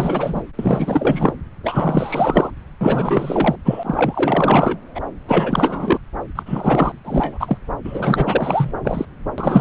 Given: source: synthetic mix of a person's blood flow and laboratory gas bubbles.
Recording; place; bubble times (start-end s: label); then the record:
Doppler ultrasound of blood flow; subclavian vein
0.00-0.43 s: bubbles
0.58-1.33 s: bubbles
1.63-2.50 s: bubbles
2.81-3.56 s: bubbles
3.65-4.78 s: bubbles
4.95-5.00 s: bubbles
5.26-5.98 s: bubbles
6.35-6.43 s: bubbles
6.46-6.92 s: bubbles
7.04-7.58 s: bubbles
7.83-8.72 s: bubbles
8.84-9.05 s: bubbles
9.38-9.61 s: bubbles
From the record:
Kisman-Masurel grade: 444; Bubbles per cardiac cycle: continuous sound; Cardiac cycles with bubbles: 100%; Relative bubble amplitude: maximal (0.775 to 0.999); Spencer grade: 4 (maximum detectable bubble signal sounding continuously throughout systole and diastole of every cardiac period, and overriding the amplitude of the normal cardiac signals); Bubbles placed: anywhere in the cardiac cycle